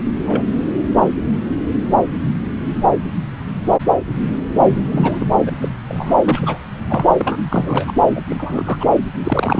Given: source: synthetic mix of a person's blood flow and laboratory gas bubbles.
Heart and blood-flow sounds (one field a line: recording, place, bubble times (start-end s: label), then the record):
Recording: Doppler ultrasound of blood flow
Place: subclavian vein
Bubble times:
0.00-0.02 s: bubbles
0.27-0.44 s: bubbles
4.91-5.26 s: bubbles
5.46-5.52 s: bubbles
5.61-5.69 s: bubbles
5.88-6.15 s: bubbles
6.25-6.63 s: bubbles
6.88-7.05 s: bubbles
7.19-7.37 s: bubbles
7.50-7.92 s: bubbles
8.10-8.21 s: bubbles
8.29-8.86 s: bubbles
9.24-9.60 s: bubbles
From the record:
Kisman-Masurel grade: 222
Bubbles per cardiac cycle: several, 3 to 8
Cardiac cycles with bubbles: 10 to 50%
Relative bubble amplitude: moderate (0.250 to 0.450)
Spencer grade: 2 (many but less than half of the cardiac periods contain bubble signals, singularly or in groups)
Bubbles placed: anywhere in the cardiac cycle